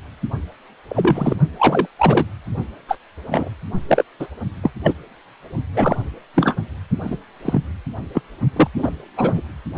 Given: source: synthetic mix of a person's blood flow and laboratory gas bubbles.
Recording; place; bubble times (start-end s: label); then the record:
Doppler ultrasound of blood flow; precordium
0.89-1.35 s: bubbles
1.59-1.87 s: bubbles
1.98-2.25 s: bubbles
2.89-2.98 s: bubbles
3.31-3.50 s: bubbles
3.88-4.03 s: bubbles
4.19-4.27 s: bubbles
4.63-4.71 s: bubbles
4.83-4.93 s: bubbles
5.74-5.96 s: bubbles
6.34-6.56 s: bubbles
7.03-7.17 s: bubbles
7.44-7.62 s: bubbles
8.13-8.21 s: bubbles
8.56-8.68 s: bubbles
8.77-8.90 s: bubbles
9.16-9.42 s: bubbles
From the record:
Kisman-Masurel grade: 233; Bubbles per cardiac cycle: several, 3 to 8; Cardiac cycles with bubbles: 50 to 99%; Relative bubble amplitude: loud (0.450 to 0.775); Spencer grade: 3 (all of the cardiac periods contain showers or single bubble signals, but not dominating or overriding the cardiac motion signals); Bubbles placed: only in the low amplitude regions of the cardiac cycle